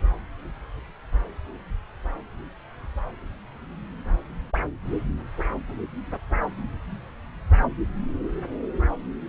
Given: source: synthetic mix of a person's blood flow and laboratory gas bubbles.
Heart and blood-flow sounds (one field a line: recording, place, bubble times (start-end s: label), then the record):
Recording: Doppler ultrasound of blood flow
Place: subclavian vein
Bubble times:
no bubbles
From the record:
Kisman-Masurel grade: 000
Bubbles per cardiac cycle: 0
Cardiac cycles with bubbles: 0%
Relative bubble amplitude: no bubbles discernible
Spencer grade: 0 (complete lack of bubble signals)